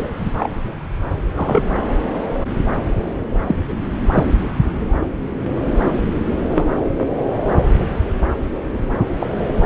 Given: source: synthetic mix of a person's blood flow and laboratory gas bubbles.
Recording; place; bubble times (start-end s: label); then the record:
Doppler ultrasound of blood flow; subclavian vein
0.37-0.50 s: bubbles
1.35-1.62 s: bubbles
3.46-3.55 s: bubbles
4.11-4.25 s: bubbles
6.50-6.65 s: bubbles
9.20-9.29 s: bubbles
From the record:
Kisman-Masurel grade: 122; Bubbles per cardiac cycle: 1 to 2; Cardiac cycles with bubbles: 10 to 50%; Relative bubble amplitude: moderate (0.250 to 0.450); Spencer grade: 2 (many but less than half of the cardiac periods contain bubble signals, singularly or in groups); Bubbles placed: anywhere in the cardiac cycle